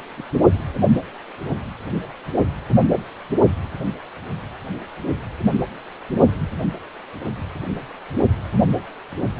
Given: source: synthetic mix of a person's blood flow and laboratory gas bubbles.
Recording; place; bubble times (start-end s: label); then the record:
Doppler ultrasound of blood flow; precordium
0.17-0.23 s: bubbles
From the record:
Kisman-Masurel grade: 111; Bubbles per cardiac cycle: 1 to 2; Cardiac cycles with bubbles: 1 to 10%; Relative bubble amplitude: barely perceptible (0.100 to 0.250); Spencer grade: 1 (occasional bubble signal discernible with the cardiac motion signal, with majority of cardiac periods free of bubbles); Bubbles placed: only in the low amplitude regions of the cardiac cycle